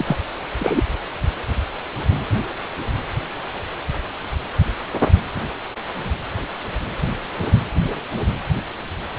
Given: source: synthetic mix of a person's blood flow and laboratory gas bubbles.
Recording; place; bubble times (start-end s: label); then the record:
Doppler ultrasound of blood flow; precordium
0.00-0.17 s: bubbles
0.60-0.82 s: bubbles
From the record:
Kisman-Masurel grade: 213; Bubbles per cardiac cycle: several, 3 to 8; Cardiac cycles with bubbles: 1 to 10%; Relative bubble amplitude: loud (0.450 to 0.775); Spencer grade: 1 (occasional bubble signal discernible with the cardiac motion signal, with majority of cardiac periods free of bubbles); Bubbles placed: anywhere in the cardiac cycle